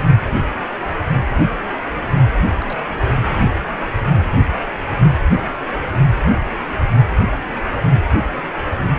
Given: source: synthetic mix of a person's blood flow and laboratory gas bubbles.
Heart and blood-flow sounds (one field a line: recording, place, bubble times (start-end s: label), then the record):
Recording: Doppler ultrasound of blood flow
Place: precordium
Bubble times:
2.60-2.82 s: bubbles
2.94-3.14 s: bubbles
From the record:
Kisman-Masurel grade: 211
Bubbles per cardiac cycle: several, 3 to 8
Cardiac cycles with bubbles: 1 to 10%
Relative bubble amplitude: barely perceptible (0.100 to 0.250)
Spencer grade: 1 (occasional bubble signal discernible with the cardiac motion signal, with majority of cardiac periods free of bubbles)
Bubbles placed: only in the low amplitude regions of the cardiac cycle